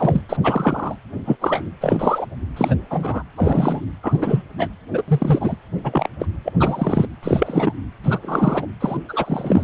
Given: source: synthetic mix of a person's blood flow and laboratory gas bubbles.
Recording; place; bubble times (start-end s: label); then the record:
Doppler ultrasound of blood flow; precordium
0.00-0.22 s: bubbles
0.29-0.37 s: bubbles
0.43-0.96 s: bubbles
1.25-1.36 s: bubbles
1.41-1.70 s: bubbles
1.81-2.26 s: bubbles
2.56-2.75 s: bubbles
2.90-3.23 s: bubbles
3.35-3.93 s: bubbles
4.03-4.42 s: bubbles
4.58-4.68 s: bubbles
4.93-5.04 s: bubbles
5.08-5.56 s: bubbles
5.84-6.08 s: bubbles
6.19-6.25 s: bubbles
6.45-6.53 s: bubbles
6.59-7.07 s: bubbles
7.22-7.74 s: bubbles
8.03-8.19 s: bubbles
8.22-8.66 s: bubbles
8.80-8.97 s: bubbles
9.09-9.64 s: bubbles
From the record:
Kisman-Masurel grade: 243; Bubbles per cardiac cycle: several, 3 to 8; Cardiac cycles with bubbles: 100%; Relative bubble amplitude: loud (0.450 to 0.775); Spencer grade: 3 (all of the cardiac periods contain showers or single bubble signals, but not dominating or overriding the cardiac motion signals); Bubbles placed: anywhere in the cardiac cycle